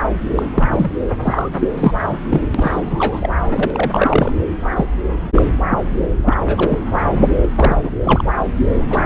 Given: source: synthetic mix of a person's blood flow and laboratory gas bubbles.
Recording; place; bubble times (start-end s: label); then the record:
Doppler ultrasound of blood flow; subclavian vein
0.35-0.43 s: bubbles
0.55-0.92 s: bubbles
1.22-1.50 s: bubbles
1.58-2.05 s: bubbles
2.10-2.16 s: bubbles
2.30-2.41 s: bubbles
2.54-3.29 s: bubbles
3.50-4.33 s: bubbles
4.75-4.85 s: bubbles
5.36-5.42 s: bubbles
5.69-5.79 s: bubbles
6.25-6.37 s: bubbles
6.47-6.79 s: bubbles
7.19-7.25 s: bubbles
7.42-7.49 s: bubbles
7.58-7.90 s: bubbles
8.02-8.22 s: bubbles
8.90-9.01 s: bubbles
From the record:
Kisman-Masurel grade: 243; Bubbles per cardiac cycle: several, 3 to 8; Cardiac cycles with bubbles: 100%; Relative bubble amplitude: loud (0.450 to 0.775); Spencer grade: 3 (all of the cardiac periods contain showers or single bubble signals, but not dominating or overriding the cardiac motion signals); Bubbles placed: anywhere in the cardiac cycle